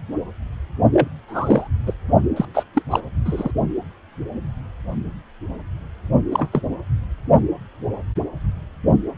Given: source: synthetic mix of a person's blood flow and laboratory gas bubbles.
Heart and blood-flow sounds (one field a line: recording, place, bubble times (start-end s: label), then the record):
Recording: Doppler ultrasound of blood flow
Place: precordium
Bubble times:
0.92-1.08 s: bubbles
1.28-1.68 s: bubbles
1.86-1.93 s: bubbles
2.36-2.46 s: bubbles
2.54-2.64 s: bubbles
2.73-2.83 s: bubbles
2.90-3.00 s: bubbles
3.25-3.52 s: bubbles
6.32-6.49 s: bubbles
6.53-6.61 s: bubbles
From the record:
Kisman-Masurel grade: 232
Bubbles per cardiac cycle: several, 3 to 8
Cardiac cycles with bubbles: 50 to 99%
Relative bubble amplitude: moderate (0.250 to 0.450)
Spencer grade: 3 (all of the cardiac periods contain showers or single bubble signals, but not dominating or overriding the cardiac motion signals)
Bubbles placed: only in the low amplitude regions of the cardiac cycle